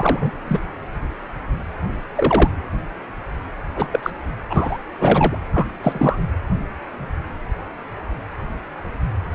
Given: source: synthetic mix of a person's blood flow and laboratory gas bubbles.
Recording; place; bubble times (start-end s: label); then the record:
Doppler ultrasound of blood flow; precordium
0.00-0.31 s: bubbles
0.47-0.60 s: bubbles
2.15-2.51 s: bubbles
3.75-3.86 s: bubbles
3.91-3.99 s: bubbles
4.03-4.11 s: bubbles
4.50-4.78 s: bubbles
5.00-5.37 s: bubbles
5.53-5.67 s: bubbles
5.83-6.20 s: bubbles
From the record:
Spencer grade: 2 (many but less than half of the cardiac periods contain bubble signals, singularly or in groups); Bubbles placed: anywhere in the cardiac cycle